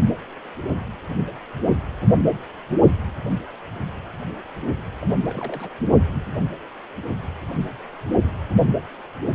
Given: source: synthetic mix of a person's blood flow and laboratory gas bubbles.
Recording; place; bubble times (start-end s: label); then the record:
Doppler ultrasound of blood flow; precordium
5.03-5.06 s: bubbles
5.20-5.69 s: bubbles
From the record:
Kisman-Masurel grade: 211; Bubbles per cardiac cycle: several, 3 to 8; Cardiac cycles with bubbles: 1 to 10%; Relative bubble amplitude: barely perceptible (0.100 to 0.250); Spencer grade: 1 (occasional bubble signal discernible with the cardiac motion signal, with majority of cardiac periods free of bubbles); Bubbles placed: only in the low amplitude regions of the cardiac cycle